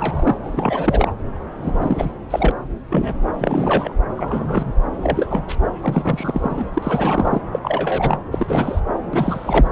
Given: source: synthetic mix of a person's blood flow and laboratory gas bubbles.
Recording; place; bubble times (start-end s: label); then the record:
Doppler ultrasound of blood flow; subclavian vein
0.00-0.38 s: bubbles
0.43-1.13 s: bubbles
1.62-2.12 s: bubbles
2.30-2.52 s: bubbles
2.90-3.16 s: bubbles
3.39-3.93 s: bubbles
4.15-4.72 s: bubbles
5.03-5.44 s: bubbles
5.48-5.55 s: bubbles
5.81-6.67 s: bubbles
6.74-7.41 s: bubbles
7.52-7.59 s: bubbles
7.62-8.17 s: bubbles
8.32-8.79 s: bubbles
9.13-9.70 s: bubbles
From the record:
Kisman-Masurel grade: 243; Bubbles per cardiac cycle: several, 3 to 8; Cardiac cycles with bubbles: 100%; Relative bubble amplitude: loud (0.450 to 0.775); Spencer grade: 3 (all of the cardiac periods contain showers or single bubble signals, but not dominating or overriding the cardiac motion signals); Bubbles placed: anywhere in the cardiac cycle